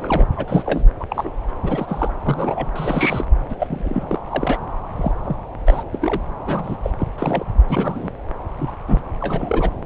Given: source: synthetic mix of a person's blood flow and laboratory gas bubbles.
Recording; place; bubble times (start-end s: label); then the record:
Doppler ultrasound of blood flow; subclavian vein
0.00-0.28 s: bubbles
0.36-0.84 s: bubbles
0.99-1.05 s: bubbles
1.10-1.31 s: bubbles
1.62-2.12 s: bubbles
2.25-2.67 s: bubbles
2.75-3.25 s: bubbles
3.49-3.56 s: bubbles
3.59-4.21 s: bubbles
4.30-4.62 s: bubbles
4.96-5.12 s: bubbles
5.25-5.36 s: bubbles
5.66-5.83 s: bubbles
5.92-6.22 s: bubbles
6.46-6.76 s: bubbles
6.83-6.91 s: bubbles
6.98-7.07 s: bubbles
7.18-7.45 s: bubbles
7.69-8.12 s: bubbles
8.58-8.71 s: bubbles
8.88-9.01 s: bubbles
9.21-9.71 s: bubbles
From the record:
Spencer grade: 3 (all of the cardiac periods contain showers or single bubble signals, but not dominating or overriding the cardiac motion signals); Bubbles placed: anywhere in the cardiac cycle